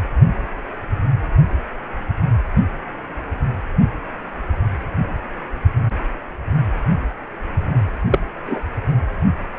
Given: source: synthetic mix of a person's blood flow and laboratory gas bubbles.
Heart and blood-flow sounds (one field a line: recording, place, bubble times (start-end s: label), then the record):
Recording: Doppler ultrasound of blood flow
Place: precordium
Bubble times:
8.11-8.20 s: bubbles
8.46-8.60 s: bubbles
From the record:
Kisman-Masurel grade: 113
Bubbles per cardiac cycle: 1 to 2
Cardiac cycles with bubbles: 1 to 10%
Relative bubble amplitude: loud (0.450 to 0.775)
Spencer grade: 1 (occasional bubble signal discernible with the cardiac motion signal, with majority of cardiac periods free of bubbles)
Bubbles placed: anywhere in the cardiac cycle